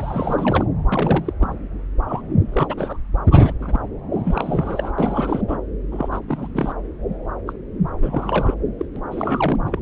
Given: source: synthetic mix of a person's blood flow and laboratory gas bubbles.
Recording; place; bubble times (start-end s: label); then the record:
Doppler ultrasound of blood flow; subclavian vein
0.00-0.65 s: bubbles
0.92-1.33 s: bubbles
1.40-1.56 s: bubbles
2.07-2.22 s: bubbles
2.53-2.98 s: bubbles
3.31-3.53 s: bubbles
3.60-3.79 s: bubbles
4.12-4.92 s: bubbles
4.98-5.42 s: bubbles
5.48-5.57 s: bubbles
5.92-6.08 s: bubbles
6.11-6.20 s: bubbles
6.28-6.76 s: bubbles
7.47-7.53 s: bubbles
8.01-8.54 s: bubbles
8.78-8.85 s: bubbles
8.96-9.00 s: bubbles
9.10-9.55 s: bubbles
9.65-9.79 s: bubbles
From the record:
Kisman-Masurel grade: 342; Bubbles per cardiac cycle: rolling drumbeat, 9 or more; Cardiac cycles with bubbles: 100%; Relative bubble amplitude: moderate (0.250 to 0.450); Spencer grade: 3 (all of the cardiac periods contain showers or single bubble signals, but not dominating or overriding the cardiac motion signals); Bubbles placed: anywhere in the cardiac cycle